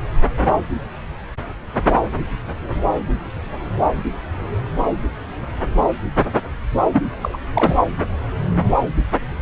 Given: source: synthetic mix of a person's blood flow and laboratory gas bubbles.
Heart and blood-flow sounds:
Doppler ultrasound of blood flow; subclavian vein
6.92-7.03 s: bubbles
7.22-7.38 s: bubbles
7.54-7.77 s: bubbles
From the record:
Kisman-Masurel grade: 213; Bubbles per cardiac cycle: several, 3 to 8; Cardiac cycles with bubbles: 1 to 10%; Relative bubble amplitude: loud (0.450 to 0.775); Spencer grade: 1 (occasional bubble signal discernible with the cardiac motion signal, with majority of cardiac periods free of bubbles); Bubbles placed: anywhere in the cardiac cycle

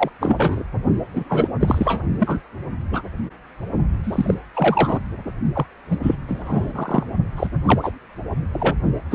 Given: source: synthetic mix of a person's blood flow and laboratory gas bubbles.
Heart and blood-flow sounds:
Doppler ultrasound of blood flow; precordium
0.00-0.10 s: bubbles
0.20-0.64 s: bubbles
1.12-1.24 s: bubbles
1.29-1.49 s: bubbles
1.60-2.02 s: bubbles
2.18-2.38 s: bubbles
2.92-3.02 s: bubbles
4.04-4.34 s: bubbles
4.54-5.00 s: bubbles
5.54-5.66 s: bubbles
5.89-5.98 s: bubbles
6.02-6.16 s: bubbles
6.27-7.03 s: bubbles
7.37-7.50 s: bubbles
7.65-7.92 s: bubbles
8.52-8.75 s: bubbles
9.11-9.14 s: bubbles
From the record:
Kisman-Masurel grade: 243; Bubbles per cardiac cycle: several, 3 to 8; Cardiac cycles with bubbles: 100%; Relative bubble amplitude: loud (0.450 to 0.775); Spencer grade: 3 (all of the cardiac periods contain showers or single bubble signals, but not dominating or overriding the cardiac motion signals); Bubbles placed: only in the low amplitude regions of the cardiac cycle

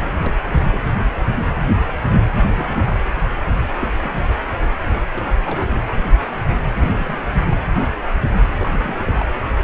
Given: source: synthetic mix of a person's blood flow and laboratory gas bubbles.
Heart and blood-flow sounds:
Doppler ultrasound of blood flow; precordium
0.00-0.35 s: bubbles
0.71-0.78 s: bubbles
2.56-2.98 s: bubbles
3.79-4.33 s: bubbles
5.13-5.38 s: bubbles
5.46-5.67 s: bubbles
5.75-5.79 s: bubbles
6.80-7.17 s: bubbles
7.30-7.44 s: bubbles
7.50-7.58 s: bubbles
8.58-8.95 s: bubbles
8.98-9.26 s: bubbles
From the record:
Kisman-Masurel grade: 221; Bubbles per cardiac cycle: several, 3 to 8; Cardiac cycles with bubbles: 10 to 50%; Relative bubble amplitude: barely perceptible (0.100 to 0.250); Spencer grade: 2 (many but less than half of the cardiac periods contain bubble signals, singularly or in groups); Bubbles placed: anywhere in the cardiac cycle

